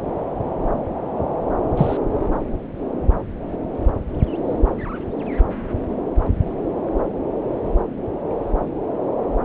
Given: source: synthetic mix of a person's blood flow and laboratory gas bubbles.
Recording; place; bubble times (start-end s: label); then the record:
Doppler ultrasound of blood flow; subclavian vein
1.77-1.98 s: bubbles
From the record:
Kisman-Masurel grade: 113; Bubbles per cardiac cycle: 1 to 2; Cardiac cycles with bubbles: 1 to 10%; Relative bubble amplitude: loud (0.450 to 0.775); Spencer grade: 1 (occasional bubble signal discernible with the cardiac motion signal, with majority of cardiac periods free of bubbles); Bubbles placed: anywhere in the cardiac cycle